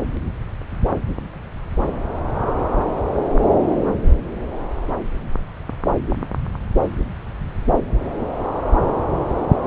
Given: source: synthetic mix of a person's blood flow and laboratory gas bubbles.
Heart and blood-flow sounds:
Doppler ultrasound of blood flow; subclavian vein
no bubbles
From the record:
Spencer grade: 0 (complete lack of bubble signals)

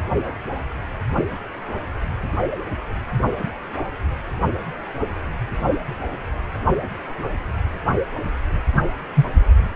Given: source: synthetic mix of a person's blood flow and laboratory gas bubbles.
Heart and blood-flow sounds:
Doppler ultrasound of blood flow; precordium
9.15-9.26 s: bubbles
From the record:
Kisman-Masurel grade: 113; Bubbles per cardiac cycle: 1 to 2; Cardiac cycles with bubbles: 1 to 10%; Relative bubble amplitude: loud (0.450 to 0.775); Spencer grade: 1 (occasional bubble signal discernible with the cardiac motion signal, with majority of cardiac periods free of bubbles); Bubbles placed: only in the low amplitude regions of the cardiac cycle

